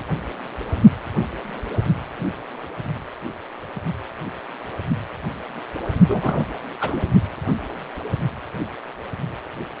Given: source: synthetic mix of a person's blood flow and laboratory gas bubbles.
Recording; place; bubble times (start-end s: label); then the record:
Doppler ultrasound of blood flow; precordium
6.09-6.46 s: bubbles
6.80-7.06 s: bubbles
From the record:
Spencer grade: 1 (occasional bubble signal discernible with the cardiac motion signal, with majority of cardiac periods free of bubbles); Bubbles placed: only in the low amplitude regions of the cardiac cycle